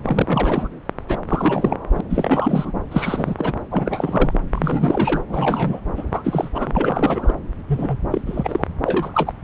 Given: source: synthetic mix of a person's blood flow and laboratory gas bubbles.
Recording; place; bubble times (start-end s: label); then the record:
Doppler ultrasound of blood flow; subclavian vein
0.03-0.68 s: bubbles
1.08-1.17 s: bubbles
1.28-1.77 s: bubbles
1.95-2.00 s: bubbles
2.09-2.72 s: bubbles
2.91-3.35 s: bubbles
3.38-3.54 s: bubbles
3.71-4.38 s: bubbles
4.51-5.21 s: bubbles
5.29-5.80 s: bubbles
5.96-6.04 s: bubbles
6.11-6.48 s: bubbles
6.54-7.33 s: bubbles
7.67-7.97 s: bubbles
8.10-8.21 s: bubbles
8.27-8.67 s: bubbles
8.84-9.33 s: bubbles
From the record:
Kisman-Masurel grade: 342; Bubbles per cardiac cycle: rolling drumbeat, 9 or more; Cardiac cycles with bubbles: 100%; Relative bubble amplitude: moderate (0.250 to 0.450); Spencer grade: 3 (all of the cardiac periods contain showers or single bubble signals, but not dominating or overriding the cardiac motion signals); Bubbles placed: anywhere in the cardiac cycle